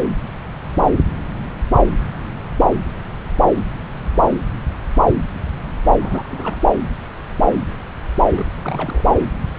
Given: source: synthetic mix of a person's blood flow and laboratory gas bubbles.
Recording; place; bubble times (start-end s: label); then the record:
Doppler ultrasound of blood flow; subclavian vein
6.00-6.61 s: bubbles
8.38-8.46 s: bubbles
8.62-9.04 s: bubbles
From the record:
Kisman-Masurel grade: 211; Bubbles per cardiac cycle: several, 3 to 8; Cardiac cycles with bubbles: 1 to 10%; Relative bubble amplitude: barely perceptible (0.100 to 0.250); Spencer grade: 1 (occasional bubble signal discernible with the cardiac motion signal, with majority of cardiac periods free of bubbles); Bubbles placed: anywhere in the cardiac cycle